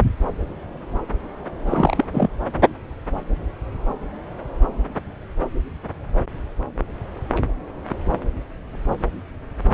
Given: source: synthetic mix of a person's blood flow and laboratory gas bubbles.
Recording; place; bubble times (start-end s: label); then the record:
Doppler ultrasound of blood flow; subclavian vein
1.66-2.05 s: bubbles
2.12-2.27 s: bubbles
From the record:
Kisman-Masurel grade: 212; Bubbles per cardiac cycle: several, 3 to 8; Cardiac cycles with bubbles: 1 to 10%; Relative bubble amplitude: moderate (0.250 to 0.450); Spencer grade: 1 (occasional bubble signal discernible with the cardiac motion signal, with majority of cardiac periods free of bubbles); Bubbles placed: anywhere in the cardiac cycle